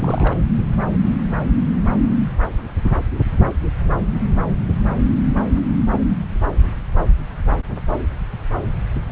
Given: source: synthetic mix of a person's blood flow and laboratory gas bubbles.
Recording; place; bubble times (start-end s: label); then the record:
Doppler ultrasound of blood flow; subclavian vein
0.00-0.36 s: bubbles
From the record:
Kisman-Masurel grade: 211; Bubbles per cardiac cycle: several, 3 to 8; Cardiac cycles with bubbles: 1 to 10%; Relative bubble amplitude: barely perceptible (0.100 to 0.250); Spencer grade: 1 (occasional bubble signal discernible with the cardiac motion signal, with majority of cardiac periods free of bubbles); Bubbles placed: anywhere in the cardiac cycle